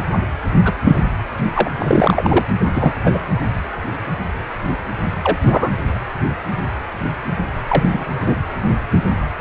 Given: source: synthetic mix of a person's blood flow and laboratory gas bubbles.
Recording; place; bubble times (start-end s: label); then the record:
Doppler ultrasound of blood flow; precordium
0.65-0.73 s: bubbles
0.83-1.06 s: bubbles
1.55-1.69 s: bubbles
1.78-2.46 s: bubbles
2.76-2.93 s: bubbles
3.04-3.19 s: bubbles
5.24-5.38 s: bubbles
5.44-5.71 s: bubbles
7.67-8.06 s: bubbles
8.19-8.39 s: bubbles
From the record:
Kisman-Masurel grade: 223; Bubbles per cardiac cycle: several, 3 to 8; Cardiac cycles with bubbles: 10 to 50%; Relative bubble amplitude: loud (0.450 to 0.775); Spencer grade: 2 (many but less than half of the cardiac periods contain bubble signals, singularly or in groups); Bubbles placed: anywhere in the cardiac cycle